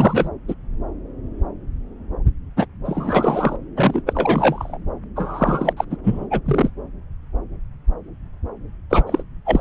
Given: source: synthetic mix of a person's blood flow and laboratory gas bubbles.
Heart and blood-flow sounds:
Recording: Doppler ultrasound of blood flow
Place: subclavian vein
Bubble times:
0.00-0.29 s: bubbles
0.48-0.54 s: bubbles
2.56-2.66 s: bubbles
2.85-3.56 s: bubbles
3.77-4.02 s: bubbles
4.06-4.77 s: bubbles
5.16-5.73 s: bubbles
5.76-5.84 s: bubbles
5.89-5.97 s: bubbles
6.03-6.26 s: bubbles
6.30-6.41 s: bubbles
6.45-6.70 s: bubbles
8.90-9.04 s: bubbles
9.07-9.22 s: bubbles
9.46-9.60 s: bubbles
From the record:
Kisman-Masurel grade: 333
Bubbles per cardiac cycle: rolling drumbeat, 9 or more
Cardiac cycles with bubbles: 50 to 99%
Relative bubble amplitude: loud (0.450 to 0.775)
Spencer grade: 3 (all of the cardiac periods contain showers or single bubble signals, but not dominating or overriding the cardiac motion signals)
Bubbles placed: anywhere in the cardiac cycle

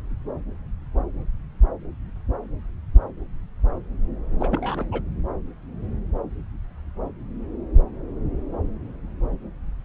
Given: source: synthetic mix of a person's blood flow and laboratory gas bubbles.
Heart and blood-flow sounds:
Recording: Doppler ultrasound of blood flow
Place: subclavian vein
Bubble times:
4.40-4.85 s: bubbles
4.92-5.01 s: bubbles
From the record:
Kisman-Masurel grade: 211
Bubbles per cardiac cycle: several, 3 to 8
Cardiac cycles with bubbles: 1 to 10%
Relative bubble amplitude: barely perceptible (0.100 to 0.250)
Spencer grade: 1 (occasional bubble signal discernible with the cardiac motion signal, with majority of cardiac periods free of bubbles)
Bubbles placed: anywhere in the cardiac cycle

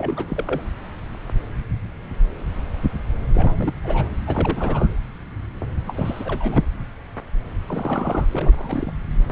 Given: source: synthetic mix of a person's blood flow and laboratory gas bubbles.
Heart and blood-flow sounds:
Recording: Doppler ultrasound of blood flow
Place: subclavian vein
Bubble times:
0.00-0.61 s: bubbles
3.34-3.73 s: bubbles
3.84-4.08 s: bubbles
4.26-4.88 s: bubbles
5.85-6.63 s: bubbles
7.66-8.25 s: bubbles
8.31-8.94 s: bubbles
From the record:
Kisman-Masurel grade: 332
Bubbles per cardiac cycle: rolling drumbeat, 9 or more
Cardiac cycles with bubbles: 50 to 99%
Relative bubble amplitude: moderate (0.250 to 0.450)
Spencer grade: 3 (all of the cardiac periods contain showers or single bubble signals, but not dominating or overriding the cardiac motion signals)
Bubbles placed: anywhere in the cardiac cycle

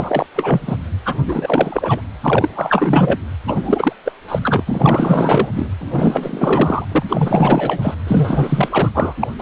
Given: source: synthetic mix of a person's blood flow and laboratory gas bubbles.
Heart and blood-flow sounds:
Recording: Doppler ultrasound of blood flow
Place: precordium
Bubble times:
0.00-0.26 s: bubbles
0.35-0.77 s: bubbles
1.05-1.17 s: bubbles
1.25-2.01 s: bubbles
2.23-2.50 s: bubbles
2.54-3.19 s: bubbles
3.48-3.93 s: bubbles
4.04-4.12 s: bubbles
4.28-4.40 s: bubbles
4.43-4.64 s: bubbles
4.67-5.48 s: bubbles
5.52-5.69 s: bubbles
5.80-6.85 s: bubbles
6.92-7.04 s: bubbles
7.08-7.95 s: bubbles
8.05-8.89 s: bubbles
8.94-9.14 s: bubbles
9.20-9.28 s: bubbles
9.38-9.42 s: bubbles
From the record:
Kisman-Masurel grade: 444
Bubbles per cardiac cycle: continuous sound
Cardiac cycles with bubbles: 100%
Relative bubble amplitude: maximal (0.775 to 0.999)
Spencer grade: 4 (maximum detectable bubble signal sounding continuously throughout systole and diastole of every cardiac period, and overriding the amplitude of the normal cardiac signals)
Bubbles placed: anywhere in the cardiac cycle

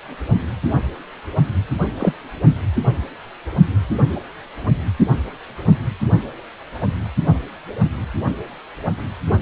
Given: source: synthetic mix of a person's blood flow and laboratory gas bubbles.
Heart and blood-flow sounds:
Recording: Doppler ultrasound of blood flow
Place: precordium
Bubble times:
2.00-2.13 s: bubbles
From the record:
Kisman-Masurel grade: 122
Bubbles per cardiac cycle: 1 to 2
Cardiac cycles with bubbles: 10 to 50%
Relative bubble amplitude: moderate (0.250 to 0.450)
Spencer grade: 2 (many but less than half of the cardiac periods contain bubble signals, singularly or in groups)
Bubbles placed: only in the low amplitude regions of the cardiac cycle

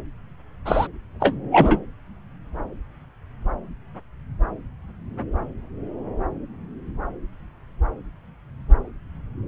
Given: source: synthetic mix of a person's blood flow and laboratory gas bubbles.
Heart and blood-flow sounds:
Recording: Doppler ultrasound of blood flow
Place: subclavian vein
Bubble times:
0.65-0.88 s: bubbles
1.20-1.35 s: bubbles
1.52-1.79 s: bubbles
From the record:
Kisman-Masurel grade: 213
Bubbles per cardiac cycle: several, 3 to 8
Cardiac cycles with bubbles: 1 to 10%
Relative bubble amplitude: loud (0.450 to 0.775)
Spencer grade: 1 (occasional bubble signal discernible with the cardiac motion signal, with majority of cardiac periods free of bubbles)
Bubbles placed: anywhere in the cardiac cycle

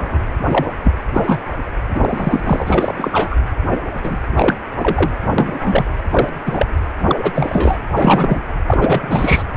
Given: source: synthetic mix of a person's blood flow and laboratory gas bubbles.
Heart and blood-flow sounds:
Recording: Doppler ultrasound of blood flow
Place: precordium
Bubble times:
0.00-0.19 s: bubbles
0.49-0.66 s: bubbles
0.83-0.93 s: bubbles
1.13-1.39 s: bubbles
1.89-3.37 s: bubbles
4.04-4.17 s: bubbles
4.36-4.56 s: bubbles
4.78-5.12 s: bubbles
5.38-5.91 s: bubbles
6.11-6.29 s: bubbles
6.46-6.66 s: bubbles
7.00-7.78 s: bubbles
7.96-8.40 s: bubbles
8.67-9.44 s: bubbles
From the record:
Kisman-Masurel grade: 243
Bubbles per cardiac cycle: several, 3 to 8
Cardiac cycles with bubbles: 100%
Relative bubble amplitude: loud (0.450 to 0.775)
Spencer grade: 3 (all of the cardiac periods contain showers or single bubble signals, but not dominating or overriding the cardiac motion signals)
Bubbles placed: anywhere in the cardiac cycle

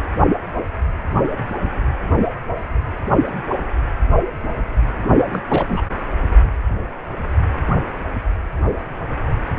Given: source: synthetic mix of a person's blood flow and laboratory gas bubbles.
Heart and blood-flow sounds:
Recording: Doppler ultrasound of blood flow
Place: precordium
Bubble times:
5.09-5.43 s: bubbles
5.48-5.84 s: bubbles
From the record:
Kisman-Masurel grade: 212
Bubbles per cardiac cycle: several, 3 to 8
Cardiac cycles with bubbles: 1 to 10%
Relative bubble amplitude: moderate (0.250 to 0.450)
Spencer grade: 1 (occasional bubble signal discernible with the cardiac motion signal, with majority of cardiac periods free of bubbles)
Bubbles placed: anywhere in the cardiac cycle

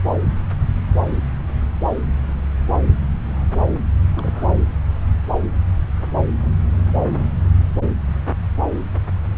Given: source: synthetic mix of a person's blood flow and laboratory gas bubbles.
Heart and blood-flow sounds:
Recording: Doppler ultrasound of blood flow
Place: subclavian vein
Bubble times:
4.14-4.59 s: bubbles
From the record:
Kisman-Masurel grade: 211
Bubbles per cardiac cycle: several, 3 to 8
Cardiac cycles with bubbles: 1 to 10%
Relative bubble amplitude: barely perceptible (0.100 to 0.250)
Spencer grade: 1 (occasional bubble signal discernible with the cardiac motion signal, with majority of cardiac periods free of bubbles)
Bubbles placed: anywhere in the cardiac cycle

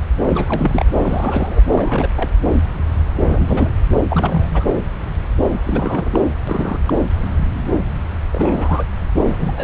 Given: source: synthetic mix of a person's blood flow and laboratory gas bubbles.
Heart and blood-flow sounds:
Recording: Doppler ultrasound of blood flow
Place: subclavian vein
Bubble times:
0.27-0.84 s: bubbles
0.98-1.60 s: bubbles
1.68-2.08 s: bubbles
2.16-2.31 s: bubbles
3.23-3.76 s: bubbles
4.09-4.67 s: bubbles
5.63-6.19 s: bubbles
6.47-6.78 s: bubbles
6.86-6.93 s: bubbles
8.32-8.87 s: bubbles
9.26-9.51 s: bubbles
9.54-9.64 s: bubbles
From the record:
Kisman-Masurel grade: 332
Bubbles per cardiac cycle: rolling drumbeat, 9 or more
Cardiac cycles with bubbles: 50 to 99%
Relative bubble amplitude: moderate (0.250 to 0.450)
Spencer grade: 3 (all of the cardiac periods contain showers or single bubble signals, but not dominating or overriding the cardiac motion signals)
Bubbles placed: anywhere in the cardiac cycle

